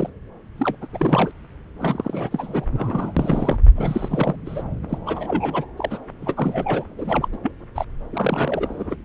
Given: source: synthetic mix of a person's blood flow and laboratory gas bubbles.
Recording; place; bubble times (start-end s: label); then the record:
Doppler ultrasound of blood flow; subclavian vein
0.00-0.09 s: bubbles
0.57-0.76 s: bubbles
0.81-0.86 s: bubbles
0.93-1.31 s: bubbles
1.80-2.66 s: bubbles
2.74-3.12 s: bubbles
3.17-3.57 s: bubbles
3.75-4.36 s: bubbles
4.46-4.63 s: bubbles
4.89-4.98 s: bubbles
5.05-5.65 s: bubbles
5.77-5.98 s: bubbles
6.22-6.34 s: bubbles
6.37-6.84 s: bubbles
6.97-7.28 s: bubbles
7.32-7.37 s: bubbles
7.42-7.52 s: bubbles
7.75-7.85 s: bubbles
8.12-8.96 s: bubbles
From the record:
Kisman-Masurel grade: 342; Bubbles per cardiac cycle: rolling drumbeat, 9 or more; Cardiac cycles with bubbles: 100%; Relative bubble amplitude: moderate (0.250 to 0.450); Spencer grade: 3 (all of the cardiac periods contain showers or single bubble signals, but not dominating or overriding the cardiac motion signals); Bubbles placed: anywhere in the cardiac cycle